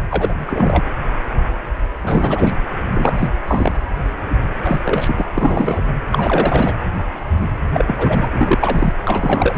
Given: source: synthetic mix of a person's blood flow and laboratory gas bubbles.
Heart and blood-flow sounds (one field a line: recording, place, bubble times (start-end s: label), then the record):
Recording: Doppler ultrasound of blood flow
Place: precordium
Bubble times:
0.10-0.83 s: bubbles
2.02-2.54 s: bubbles
2.94-3.28 s: bubbles
3.47-3.75 s: bubbles
4.63-4.79 s: bubbles
4.85-5.27 s: bubbles
5.35-5.82 s: bubbles
6.12-6.73 s: bubbles
7.73-8.28 s: bubbles
8.32-8.94 s: bubbles
9.04-9.57 s: bubbles
From the record:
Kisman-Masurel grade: 333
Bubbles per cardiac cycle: rolling drumbeat, 9 or more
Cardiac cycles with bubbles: 50 to 99%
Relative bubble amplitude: loud (0.450 to 0.775)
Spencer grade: 3 (all of the cardiac periods contain showers or single bubble signals, but not dominating or overriding the cardiac motion signals)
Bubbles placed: anywhere in the cardiac cycle